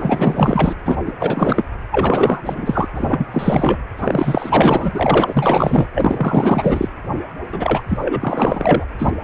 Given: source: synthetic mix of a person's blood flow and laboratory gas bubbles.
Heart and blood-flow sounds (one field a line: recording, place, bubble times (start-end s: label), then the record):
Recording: Doppler ultrasound of blood flow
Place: precordium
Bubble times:
0.00-0.74 s: bubbles
0.85-0.97 s: bubbles
1.06-1.14 s: bubbles
1.19-1.65 s: bubbles
1.91-2.89 s: bubbles
2.95-3.26 s: bubbles
3.31-3.77 s: bubbles
3.98-5.89 s: bubbles
5.95-6.88 s: bubbles
7.52-7.82 s: bubbles
7.88-8.85 s: bubbles
8.98-9.10 s: bubbles
From the record:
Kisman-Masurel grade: 444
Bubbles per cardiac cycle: continuous sound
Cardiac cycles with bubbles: 100%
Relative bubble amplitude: maximal (0.775 to 0.999)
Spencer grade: 4 (maximum detectable bubble signal sounding continuously throughout systole and diastole of every cardiac period, and overriding the amplitude of the normal cardiac signals)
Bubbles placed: anywhere in the cardiac cycle